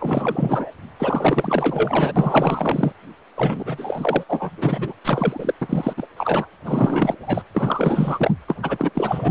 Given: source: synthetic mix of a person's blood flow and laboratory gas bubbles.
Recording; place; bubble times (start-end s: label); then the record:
Doppler ultrasound of blood flow; precordium
0.00-0.70 s: bubbles
0.99-2.12 s: bubbles
2.16-2.92 s: bubbles
3.34-4.23 s: bubbles
4.29-4.50 s: bubbles
4.56-4.93 s: bubbles
5.04-5.54 s: bubbles
5.61-5.93 s: bubbles
5.96-6.07 s: bubbles
6.17-6.48 s: bubbles
6.64-7.15 s: bubbles
7.20-7.43 s: bubbles
7.54-8.31 s: bubbles
8.47-8.55 s: bubbles
8.62-8.90 s: bubbles
8.95-9.31 s: bubbles
From the record:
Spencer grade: 4 (maximum detectable bubble signal sounding continuously throughout systole and diastole of every cardiac period, and overriding the amplitude of the normal cardiac signals); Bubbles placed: anywhere in the cardiac cycle